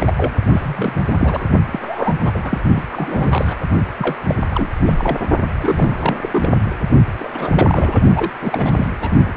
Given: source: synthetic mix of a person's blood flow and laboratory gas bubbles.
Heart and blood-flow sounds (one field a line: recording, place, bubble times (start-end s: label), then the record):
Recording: Doppler ultrasound of blood flow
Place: precordium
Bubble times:
0.00-0.13 s: bubbles
0.17-0.32 s: bubbles
0.52-1.03 s: bubbles
1.06-1.48 s: bubbles
1.71-2.13 s: bubbles
2.20-2.32 s: bubbles
2.34-2.59 s: bubbles
2.74-2.83 s: bubbles
2.92-3.56 s: bubbles
3.98-4.17 s: bubbles
4.28-4.35 s: bubbles
4.50-4.69 s: bubbles
4.85-5.21 s: bubbles
5.60-6.16 s: bubbles
6.21-6.29 s: bubbles
6.33-6.61 s: bubbles
7.20-8.01 s: bubbles
8.15-8.31 s: bubbles
8.41-8.87 s: bubbles
9.00-9.10 s: bubbles
9.25-9.32 s: bubbles
From the record:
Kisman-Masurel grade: 342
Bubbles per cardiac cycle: rolling drumbeat, 9 or more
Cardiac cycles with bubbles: 100%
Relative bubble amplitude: moderate (0.250 to 0.450)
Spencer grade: 3 (all of the cardiac periods contain showers or single bubble signals, but not dominating or overriding the cardiac motion signals)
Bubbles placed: only in the low amplitude regions of the cardiac cycle